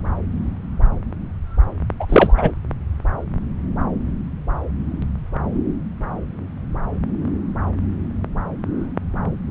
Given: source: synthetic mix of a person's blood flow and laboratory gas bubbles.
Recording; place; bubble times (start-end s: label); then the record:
Doppler ultrasound of blood flow; subclavian vein
1.99-2.06 s: bubbles
2.09-2.52 s: bubbles
From the record:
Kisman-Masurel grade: 213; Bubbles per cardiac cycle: several, 3 to 8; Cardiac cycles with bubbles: 1 to 10%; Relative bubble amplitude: loud (0.450 to 0.775); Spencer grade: 1 (occasional bubble signal discernible with the cardiac motion signal, with majority of cardiac periods free of bubbles); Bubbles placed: anywhere in the cardiac cycle